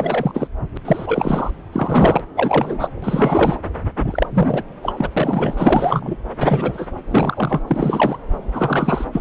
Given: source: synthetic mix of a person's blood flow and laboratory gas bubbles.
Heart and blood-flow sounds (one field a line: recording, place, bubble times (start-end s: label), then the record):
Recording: Doppler ultrasound of blood flow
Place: subclavian vein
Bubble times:
0.00-0.48 s: bubbles
0.75-0.77 s: bubbles
0.85-1.50 s: bubbles
1.72-2.22 s: bubbles
2.35-2.88 s: bubbles
3.02-3.62 s: bubbles
4.02-4.27 s: bubbles
4.30-4.63 s: bubbles
4.83-5.08 s: bubbles
5.17-6.17 s: bubbles
6.37-6.88 s: bubbles
7.08-7.61 s: bubbles
7.67-8.17 s: bubbles
8.53-9.05 s: bubbles
9.12-9.21 s: bubbles
From the record:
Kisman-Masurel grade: 343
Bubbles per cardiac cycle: rolling drumbeat, 9 or more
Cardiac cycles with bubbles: 100%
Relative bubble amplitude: loud (0.450 to 0.775)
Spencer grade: 3 (all of the cardiac periods contain showers or single bubble signals, but not dominating or overriding the cardiac motion signals)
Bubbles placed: anywhere in the cardiac cycle